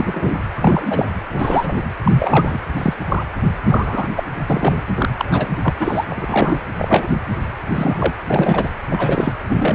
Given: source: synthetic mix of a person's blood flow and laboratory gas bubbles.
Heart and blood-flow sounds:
Doppler ultrasound of blood flow; precordium
0.00-0.36 s: bubbles
0.55-1.07 s: bubbles
1.30-1.84 s: bubbles
2.03-2.59 s: bubbles
2.77-2.94 s: bubbles
3.08-3.24 s: bubbles
3.63-4.09 s: bubbles
4.16-4.23 s: bubbles
4.50-4.82 s: bubbles
4.95-5.09 s: bubbles
5.17-5.48 s: bubbles
5.62-5.75 s: bubbles
5.79-6.05 s: bubbles
6.09-6.58 s: bubbles
6.78-7.08 s: bubbles
7.69-8.14 s: bubbles
8.28-8.70 s: bubbles
8.89-9.33 s: bubbles
9.49-9.75 s: bubbles
From the record:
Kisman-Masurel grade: 243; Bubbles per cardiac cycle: several, 3 to 8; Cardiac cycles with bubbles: 100%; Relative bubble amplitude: loud (0.450 to 0.775); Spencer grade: 3 (all of the cardiac periods contain showers or single bubble signals, but not dominating or overriding the cardiac motion signals); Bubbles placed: anywhere in the cardiac cycle

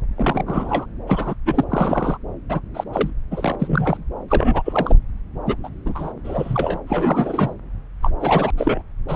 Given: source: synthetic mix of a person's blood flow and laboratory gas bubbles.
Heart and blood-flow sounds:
Doppler ultrasound of blood flow; subclavian vein
0.16-0.43 s: bubbles
0.47-0.85 s: bubbles
1.07-1.34 s: bubbles
1.46-1.65 s: bubbles
1.70-2.18 s: bubbles
2.49-2.61 s: bubbles
2.74-2.84 s: bubbles
2.92-3.10 s: bubbles
3.31-3.56 s: bubbles
3.59-4.04 s: bubbles
4.28-4.62 s: bubbles
4.64-4.96 s: bubbles
5.46-5.56 s: bubbles
5.63-5.69 s: bubbles
5.85-6.12 s: bubbles
6.24-6.79 s: bubbles
6.87-7.54 s: bubbles
8.02-8.12 s: bubbles
8.21-8.52 s: bubbles
8.57-8.82 s: bubbles
9.08-9.16 s: bubbles
From the record:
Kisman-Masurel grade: 233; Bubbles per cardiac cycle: several, 3 to 8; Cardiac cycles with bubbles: 50 to 99%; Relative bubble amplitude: loud (0.450 to 0.775); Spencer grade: 3 (all of the cardiac periods contain showers or single bubble signals, but not dominating or overriding the cardiac motion signals); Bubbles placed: anywhere in the cardiac cycle

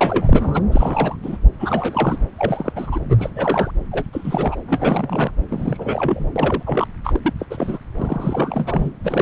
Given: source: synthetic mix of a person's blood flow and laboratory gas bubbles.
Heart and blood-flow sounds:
Doppler ultrasound of blood flow; subclavian vein
0.01-0.61 s: bubbles
0.71-1.16 s: bubbles
1.22-1.37 s: bubbles
1.59-2.19 s: bubbles
2.36-2.73 s: bubbles
2.75-3.00 s: bubbles
3.09-3.30 s: bubbles
3.35-3.71 s: bubbles
3.92-4.07 s: bubbles
4.12-4.55 s: bubbles
4.67-5.31 s: bubbles
5.49-6.30 s: bubbles
6.35-6.63 s: bubbles
6.66-6.88 s: bubbles
7.04-7.20 s: bubbles
7.24-7.33 s: bubbles
7.39-7.46 s: bubbles
7.50-7.78 s: bubbles
7.98-8.93 s: bubbles
9.04-9.22 s: bubbles
From the record:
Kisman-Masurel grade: 342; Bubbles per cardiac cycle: rolling drumbeat, 9 or more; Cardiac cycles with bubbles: 100%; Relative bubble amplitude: moderate (0.250 to 0.450); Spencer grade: 3 (all of the cardiac periods contain showers or single bubble signals, but not dominating or overriding the cardiac motion signals); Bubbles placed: anywhere in the cardiac cycle

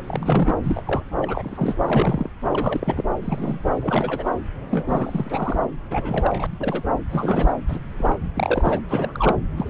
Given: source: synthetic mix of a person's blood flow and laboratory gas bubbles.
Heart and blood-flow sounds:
Doppler ultrasound of blood flow; subclavian vein
0.07-0.55 s: bubbles
0.64-0.82 s: bubbles
0.85-1.02 s: bubbles
1.21-1.75 s: bubbles
1.84-2.29 s: bubbles
2.52-3.02 s: bubbles
3.21-3.60 s: bubbles
3.79-4.30 s: bubbles
4.70-4.86 s: bubbles
4.88-5.62 s: bubbles
5.91-6.47 s: bubbles
6.59-6.83 s: bubbles
7.10-7.53 s: bubbles
7.68-7.81 s: bubbles
7.99-8.19 s: bubbles
8.35-8.79 s: bubbles
8.89-9.36 s: bubbles
9.57-9.70 s: bubbles
From the record:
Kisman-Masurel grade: 242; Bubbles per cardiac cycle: several, 3 to 8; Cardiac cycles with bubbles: 100%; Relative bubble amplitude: moderate (0.250 to 0.450); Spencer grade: 3 (all of the cardiac periods contain showers or single bubble signals, but not dominating or overriding the cardiac motion signals); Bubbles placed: anywhere in the cardiac cycle

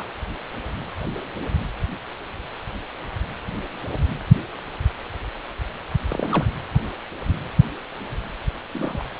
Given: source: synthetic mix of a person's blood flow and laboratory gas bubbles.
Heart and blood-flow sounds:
Doppler ultrasound of blood flow; precordium
0.00-0.04 s: bubbles
6.08-6.46 s: bubbles
8.72-9.03 s: bubbles
From the record:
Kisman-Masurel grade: 221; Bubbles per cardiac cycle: several, 3 to 8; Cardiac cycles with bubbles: 10 to 50%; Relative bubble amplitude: barely perceptible (0.100 to 0.250); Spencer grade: 2 (many but less than half of the cardiac periods contain bubble signals, singularly or in groups); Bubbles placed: anywhere in the cardiac cycle

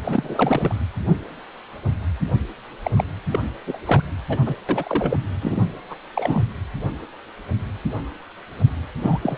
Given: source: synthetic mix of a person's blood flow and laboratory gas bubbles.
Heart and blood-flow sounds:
Doppler ultrasound of blood flow; precordium
0.04-0.73 s: bubbles
2.83-2.91 s: bubbles
2.96-3.04 s: bubbles
3.31-3.39 s: bubbles
3.67-3.78 s: bubbles
3.85-4.02 s: bubbles
4.29-4.38 s: bubbles
4.46-4.55 s: bubbles
4.68-5.18 s: bubbles
5.41-5.64 s: bubbles
5.90-5.96 s: bubbles
6.14-6.44 s: bubbles
9.02-9.19 s: bubbles
9.23-9.38 s: bubbles
From the record:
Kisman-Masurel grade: 332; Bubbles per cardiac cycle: rolling drumbeat, 9 or more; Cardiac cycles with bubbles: 50 to 99%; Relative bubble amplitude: moderate (0.250 to 0.450); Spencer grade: 3 (all of the cardiac periods contain showers or single bubble signals, but not dominating or overriding the cardiac motion signals); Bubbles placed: anywhere in the cardiac cycle

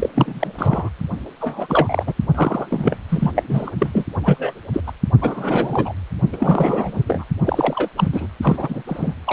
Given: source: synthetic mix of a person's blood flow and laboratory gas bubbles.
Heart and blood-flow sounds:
Doppler ultrasound of blood flow; precordium
0.00-0.09 s: bubbles
0.14-0.52 s: bubbles
0.57-0.89 s: bubbles
1.41-2.04 s: bubbles
2.06-2.14 s: bubbles
2.35-2.67 s: bubbles
2.70-2.96 s: bubbles
3.08-3.31 s: bubbles
3.35-3.43 s: bubbles
3.47-3.70 s: bubbles
3.78-4.04 s: bubbles
4.23-4.60 s: bubbles
4.73-4.80 s: bubbles
4.87-4.92 s: bubbles
5.21-5.92 s: bubbles
6.33-7.03 s: bubbles
7.07-7.25 s: bubbles
7.45-7.88 s: bubbles
7.96-8.08 s: bubbles
8.12-8.27 s: bubbles
8.42-8.82 s: bubbles
8.87-9.14 s: bubbles
9.26-9.33 s: bubbles
From the record:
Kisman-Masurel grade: 343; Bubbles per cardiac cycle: rolling drumbeat, 9 or more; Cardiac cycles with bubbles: 100%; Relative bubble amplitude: loud (0.450 to 0.775); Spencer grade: 3 (all of the cardiac periods contain showers or single bubble signals, but not dominating or overriding the cardiac motion signals); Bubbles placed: only in the low amplitude regions of the cardiac cycle

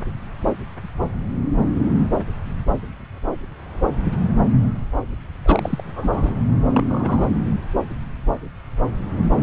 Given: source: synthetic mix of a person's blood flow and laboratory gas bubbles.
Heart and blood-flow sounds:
Doppler ultrasound of blood flow; subclavian vein
5.46-6.34 s: bubbles
6.70-7.29 s: bubbles
From the record:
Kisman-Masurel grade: 222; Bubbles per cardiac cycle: several, 3 to 8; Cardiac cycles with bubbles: 10 to 50%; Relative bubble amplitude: moderate (0.250 to 0.450); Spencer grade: 2 (many but less than half of the cardiac periods contain bubble signals, singularly or in groups); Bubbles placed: anywhere in the cardiac cycle

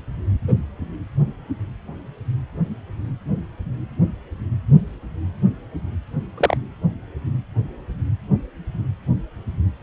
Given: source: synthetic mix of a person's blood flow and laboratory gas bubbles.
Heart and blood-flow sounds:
Doppler ultrasound of blood flow; precordium
0.48-0.54 s: bubbles
6.37-6.57 s: bubbles
From the record:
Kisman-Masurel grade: 112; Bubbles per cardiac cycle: 1 to 2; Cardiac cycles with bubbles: 1 to 10%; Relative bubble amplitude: moderate (0.250 to 0.450); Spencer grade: 1 (occasional bubble signal discernible with the cardiac motion signal, with majority of cardiac periods free of bubbles); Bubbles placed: anywhere in the cardiac cycle

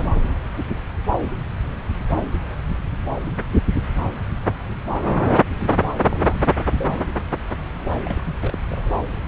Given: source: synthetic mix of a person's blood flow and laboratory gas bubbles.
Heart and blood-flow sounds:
Doppler ultrasound of blood flow; subclavian vein
0.00-0.17 s: bubbles
6.09-6.53 s: bubbles
6.75-7.05 s: bubbles
8.01-8.37 s: bubbles
8.43-8.57 s: bubbles
8.70-8.95 s: bubbles
From the record:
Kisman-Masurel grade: 221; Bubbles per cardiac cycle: several, 3 to 8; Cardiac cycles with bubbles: 10 to 50%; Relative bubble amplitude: barely perceptible (0.100 to 0.250); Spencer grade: 2 (many but less than half of the cardiac periods contain bubble signals, singularly or in groups); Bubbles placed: anywhere in the cardiac cycle

